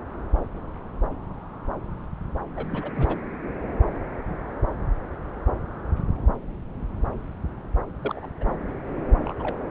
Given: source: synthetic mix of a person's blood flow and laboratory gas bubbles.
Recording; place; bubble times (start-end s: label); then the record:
Doppler ultrasound of blood flow; subclavian vein
2.57-2.66 s: bubbles
2.71-2.91 s: bubbles
2.95-3.17 s: bubbles
8.00-8.30 s: bubbles
8.40-8.58 s: bubbles
9.24-9.35 s: bubbles
9.39-9.61 s: bubbles
From the record:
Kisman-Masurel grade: 221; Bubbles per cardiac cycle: several, 3 to 8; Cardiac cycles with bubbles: 10 to 50%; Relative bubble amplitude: barely perceptible (0.100 to 0.250); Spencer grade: 2 (many but less than half of the cardiac periods contain bubble signals, singularly or in groups); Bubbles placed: anywhere in the cardiac cycle